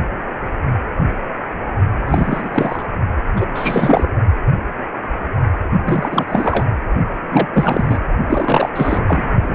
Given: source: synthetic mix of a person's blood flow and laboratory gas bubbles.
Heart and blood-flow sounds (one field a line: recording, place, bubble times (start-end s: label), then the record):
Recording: Doppler ultrasound of blood flow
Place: precordium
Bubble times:
2.06-2.86 s: bubbles
3.36-3.46 s: bubbles
3.54-4.08 s: bubbles
5.84-6.25 s: bubbles
6.28-6.66 s: bubbles
7.30-7.47 s: bubbles
7.53-7.99 s: bubbles
8.27-8.70 s: bubbles
8.75-9.29 s: bubbles
9.44-9.55 s: bubbles
From the record:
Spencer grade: 3 (all of the cardiac periods contain showers or single bubble signals, but not dominating or overriding the cardiac motion signals)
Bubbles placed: only in the low amplitude regions of the cardiac cycle